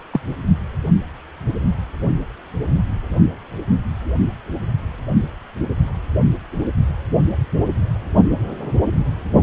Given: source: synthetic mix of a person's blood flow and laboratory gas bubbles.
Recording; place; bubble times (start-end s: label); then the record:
Doppler ultrasound of blood flow; precordium
0.12-0.20 s: bubbles
From the record:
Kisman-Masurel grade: 123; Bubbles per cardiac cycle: 1 to 2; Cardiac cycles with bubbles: 10 to 50%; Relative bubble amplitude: loud (0.450 to 0.775); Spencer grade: 2 (many but less than half of the cardiac periods contain bubble signals, singularly or in groups); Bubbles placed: only in the low amplitude regions of the cardiac cycle